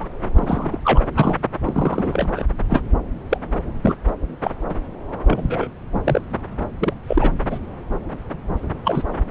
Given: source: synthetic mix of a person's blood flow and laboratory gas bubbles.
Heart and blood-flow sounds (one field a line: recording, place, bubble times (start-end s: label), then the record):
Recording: Doppler ultrasound of blood flow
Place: subclavian vein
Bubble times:
0.00-0.05 s: bubbles
0.33-0.80 s: bubbles
0.84-1.03 s: bubbles
1.16-1.39 s: bubbles
1.63-2.45 s: bubbles
2.69-2.81 s: bubbles
3.29-3.38 s: bubbles
3.84-3.97 s: bubbles
4.42-4.51 s: bubbles
4.68-4.74 s: bubbles
5.27-5.67 s: bubbles
6.04-6.21 s: bubbles
6.80-6.93 s: bubbles
7.08-7.30 s: bubbles
7.50-7.58 s: bubbles
8.84-9.02 s: bubbles
From the record:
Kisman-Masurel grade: 242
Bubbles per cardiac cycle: several, 3 to 8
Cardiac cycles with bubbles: 100%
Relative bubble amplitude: moderate (0.250 to 0.450)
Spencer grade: 3 (all of the cardiac periods contain showers or single bubble signals, but not dominating or overriding the cardiac motion signals)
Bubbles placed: anywhere in the cardiac cycle